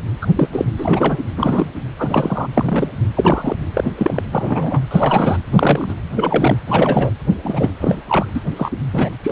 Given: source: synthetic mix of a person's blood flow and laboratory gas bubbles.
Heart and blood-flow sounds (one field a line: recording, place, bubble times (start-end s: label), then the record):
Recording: Doppler ultrasound of blood flow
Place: precordium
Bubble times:
0.21-0.27 s: bubbles
0.35-0.48 s: bubbles
0.52-0.65 s: bubbles
0.78-1.18 s: bubbles
1.35-1.70 s: bubbles
1.98-2.48 s: bubbles
2.54-2.88 s: bubbles
3.15-3.56 s: bubbles
3.74-3.84 s: bubbles
3.97-4.21 s: bubbles
4.31-4.81 s: bubbles
4.91-5.37 s: bubbles
5.51-5.95 s: bubbles
6.15-6.58 s: bubbles
6.67-7.11 s: bubbles
7.43-7.72 s: bubbles
7.79-8.02 s: bubbles
8.08-8.26 s: bubbles
8.35-8.41 s: bubbles
8.56-8.71 s: bubbles
8.93-9.10 s: bubbles
9.24-9.32 s: bubbles
From the record:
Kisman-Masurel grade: 243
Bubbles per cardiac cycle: several, 3 to 8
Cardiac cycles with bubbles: 100%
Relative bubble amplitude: loud (0.450 to 0.775)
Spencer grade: 3 (all of the cardiac periods contain showers or single bubble signals, but not dominating or overriding the cardiac motion signals)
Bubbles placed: anywhere in the cardiac cycle